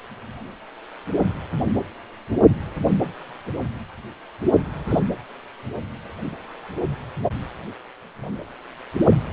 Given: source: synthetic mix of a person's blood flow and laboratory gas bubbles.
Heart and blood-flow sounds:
Doppler ultrasound of blood flow; precordium
4.88-4.99 s: bubbles
From the record:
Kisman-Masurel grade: 112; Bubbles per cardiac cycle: 1 to 2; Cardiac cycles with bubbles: 1 to 10%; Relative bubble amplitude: moderate (0.250 to 0.450); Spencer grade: 1 (occasional bubble signal discernible with the cardiac motion signal, with majority of cardiac periods free of bubbles); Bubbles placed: anywhere in the cardiac cycle

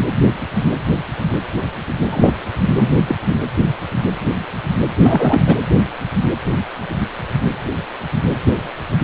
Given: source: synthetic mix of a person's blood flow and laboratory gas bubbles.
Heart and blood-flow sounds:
Doppler ultrasound of blood flow; precordium
2.10-2.33 s: bubbles
2.76-3.01 s: bubbles
3.07-3.15 s: bubbles
3.29-3.36 s: bubbles
5.01-5.56 s: bubbles
From the record:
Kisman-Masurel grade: 223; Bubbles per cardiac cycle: several, 3 to 8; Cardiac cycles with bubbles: 10 to 50%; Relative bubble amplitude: loud (0.450 to 0.775); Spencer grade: 2 (many but less than half of the cardiac periods contain bubble signals, singularly or in groups); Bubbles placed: anywhere in the cardiac cycle

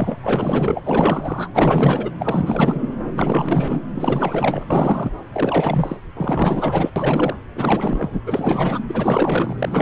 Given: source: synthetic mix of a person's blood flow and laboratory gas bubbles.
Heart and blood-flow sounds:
Doppler ultrasound of blood flow; subclavian vein
0.00-0.16 s: bubbles
0.22-0.82 s: bubbles
0.84-1.48 s: bubbles
1.52-2.10 s: bubbles
2.19-2.80 s: bubbles
3.03-3.81 s: bubbles
3.94-4.65 s: bubbles
4.70-5.12 s: bubbles
5.33-5.96 s: bubbles
6.17-6.90 s: bubbles
6.96-7.36 s: bubbles
7.55-8.19 s: bubbles
8.26-8.79 s: bubbles
8.86-9.82 s: bubbles
From the record:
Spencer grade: 4 (maximum detectable bubble signal sounding continuously throughout systole and diastole of every cardiac period, and overriding the amplitude of the normal cardiac signals); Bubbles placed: anywhere in the cardiac cycle

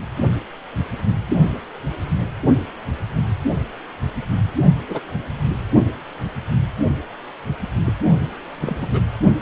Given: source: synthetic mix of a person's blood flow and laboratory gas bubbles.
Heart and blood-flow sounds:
Doppler ultrasound of blood flow; precordium
4.89-5.00 s: bubbles
7.86-7.95 s: bubbles
8.62-8.88 s: bubbles
8.91-9.01 s: bubbles
From the record:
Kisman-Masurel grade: 121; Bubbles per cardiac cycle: 1 to 2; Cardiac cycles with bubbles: 10 to 50%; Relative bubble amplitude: barely perceptible (0.100 to 0.250); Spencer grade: 2 (many but less than half of the cardiac periods contain bubble signals, singularly or in groups); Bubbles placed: only in the low amplitude regions of the cardiac cycle

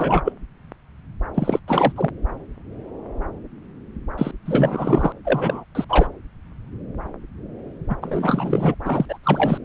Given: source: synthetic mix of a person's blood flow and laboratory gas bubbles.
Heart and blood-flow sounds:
Doppler ultrasound of blood flow; subclavian vein
0.00-0.22 s: bubbles
0.24-0.33 s: bubbles
1.34-1.59 s: bubbles
1.68-1.93 s: bubbles
1.96-2.10 s: bubbles
4.18-4.31 s: bubbles
4.45-5.12 s: bubbles
5.25-5.65 s: bubbles
5.75-5.85 s: bubbles
5.89-6.07 s: bubbles
7.89-7.96 s: bubbles
8.01-8.74 s: bubbles
8.84-9.05 s: bubbles
9.08-9.18 s: bubbles
9.23-9.58 s: bubbles
From the record:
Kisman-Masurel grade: 333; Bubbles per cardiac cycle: rolling drumbeat, 9 or more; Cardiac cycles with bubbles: 50 to 99%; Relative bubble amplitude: loud (0.450 to 0.775); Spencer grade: 3 (all of the cardiac periods contain showers or single bubble signals, but not dominating or overriding the cardiac motion signals); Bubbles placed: anywhere in the cardiac cycle

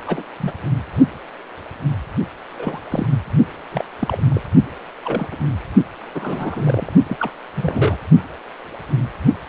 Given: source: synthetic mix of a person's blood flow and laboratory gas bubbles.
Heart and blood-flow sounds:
Doppler ultrasound of blood flow; precordium
0.06-0.23 s: bubbles
0.40-0.51 s: bubbles
2.58-2.79 s: bubbles
2.90-3.06 s: bubbles
3.71-3.84 s: bubbles
3.99-4.23 s: bubbles
4.29-4.41 s: bubbles
5.04-5.28 s: bubbles
5.31-5.37 s: bubbles
6.14-6.93 s: bubbles
7.07-7.17 s: bubbles
7.20-7.30 s: bubbles
7.57-7.98 s: bubbles
From the record:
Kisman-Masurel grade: 232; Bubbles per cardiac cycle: several, 3 to 8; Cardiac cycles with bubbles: 50 to 99%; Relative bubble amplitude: moderate (0.250 to 0.450); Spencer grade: 3 (all of the cardiac periods contain showers or single bubble signals, but not dominating or overriding the cardiac motion signals); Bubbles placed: only in the low amplitude regions of the cardiac cycle

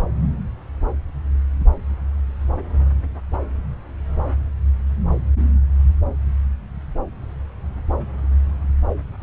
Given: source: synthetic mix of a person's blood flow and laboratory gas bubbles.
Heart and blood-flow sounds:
Doppler ultrasound of blood flow; subclavian vein
no bubbles
From the record:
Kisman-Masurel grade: 000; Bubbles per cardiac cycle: 0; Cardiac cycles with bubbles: 0%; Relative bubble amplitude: no bubbles discernible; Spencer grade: 0 (complete lack of bubble signals)

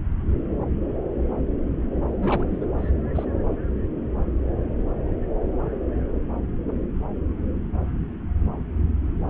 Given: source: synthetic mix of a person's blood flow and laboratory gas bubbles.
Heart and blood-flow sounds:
Doppler ultrasound of blood flow; subclavian vein
2.08-2.65 s: bubbles
2.79-2.90 s: bubbles
3.15-3.25 s: bubbles
From the record:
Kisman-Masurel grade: 211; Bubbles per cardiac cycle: several, 3 to 8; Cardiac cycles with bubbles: 1 to 10%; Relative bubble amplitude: barely perceptible (0.100 to 0.250); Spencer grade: 1 (occasional bubble signal discernible with the cardiac motion signal, with majority of cardiac periods free of bubbles); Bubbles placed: anywhere in the cardiac cycle

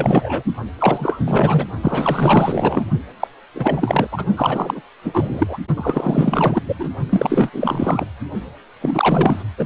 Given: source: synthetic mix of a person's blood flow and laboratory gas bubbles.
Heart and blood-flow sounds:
Doppler ultrasound of blood flow; precordium
0.00-0.43 s: bubbles
0.78-1.64 s: bubbles
1.81-2.85 s: bubbles
3.20-3.28 s: bubbles
3.55-4.07 s: bubbles
4.11-4.25 s: bubbles
4.36-4.81 s: bubbles
5.04-5.58 s: bubbles
5.76-6.62 s: bubbles
6.67-6.74 s: bubbles
6.79-6.89 s: bubbles
7.09-8.05 s: bubbles
8.80-9.43 s: bubbles
9.57-9.65 s: bubbles
From the record:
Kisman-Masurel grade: 444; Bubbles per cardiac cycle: continuous sound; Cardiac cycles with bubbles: 100%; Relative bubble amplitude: maximal (0.775 to 0.999); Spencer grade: 4 (maximum detectable bubble signal sounding continuously throughout systole and diastole of every cardiac period, and overriding the amplitude of the normal cardiac signals); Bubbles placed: only in the low amplitude regions of the cardiac cycle

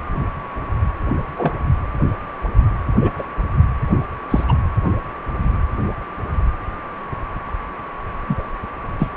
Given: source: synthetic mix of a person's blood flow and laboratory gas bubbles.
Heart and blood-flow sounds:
Doppler ultrasound of blood flow; precordium
1.38-1.52 s: bubbles
3.01-3.12 s: bubbles
3.19-3.23 s: bubbles
4.30-4.44 s: bubbles
4.48-4.54 s: bubbles
8.27-8.43 s: bubbles
8.99-9.11 s: bubbles
From the record:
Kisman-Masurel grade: 123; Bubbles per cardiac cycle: 1 to 2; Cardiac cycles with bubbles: 10 to 50%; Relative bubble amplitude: loud (0.450 to 0.775); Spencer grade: 2 (many but less than half of the cardiac periods contain bubble signals, singularly or in groups); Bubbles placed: anywhere in the cardiac cycle

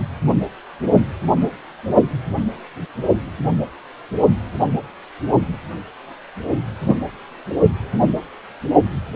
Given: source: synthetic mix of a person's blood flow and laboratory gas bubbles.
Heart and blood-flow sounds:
Doppler ultrasound of blood flow; precordium
6.86-7.00 s: bubbles
From the record:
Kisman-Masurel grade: 123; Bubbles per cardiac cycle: 1 to 2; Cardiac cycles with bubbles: 10 to 50%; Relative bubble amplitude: loud (0.450 to 0.775); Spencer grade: 2 (many but less than half of the cardiac periods contain bubble signals, singularly or in groups); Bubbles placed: only in the low amplitude regions of the cardiac cycle

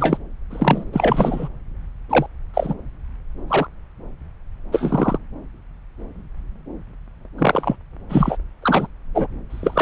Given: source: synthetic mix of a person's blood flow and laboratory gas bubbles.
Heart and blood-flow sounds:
Doppler ultrasound of blood flow; subclavian vein
0.00-0.17 s: bubbles
0.50-0.84 s: bubbles
0.92-1.48 s: bubbles
2.09-2.26 s: bubbles
2.53-2.75 s: bubbles
3.48-3.67 s: bubbles
4.72-5.18 s: bubbles
7.38-7.76 s: bubbles
8.09-8.37 s: bubbles
8.62-8.87 s: bubbles
9.15-9.27 s: bubbles
9.50-9.82 s: bubbles
From the record:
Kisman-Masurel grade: 233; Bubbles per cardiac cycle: several, 3 to 8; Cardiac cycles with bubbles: 50 to 99%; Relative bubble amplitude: loud (0.450 to 0.775); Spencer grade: 3 (all of the cardiac periods contain showers or single bubble signals, but not dominating or overriding the cardiac motion signals); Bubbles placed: anywhere in the cardiac cycle

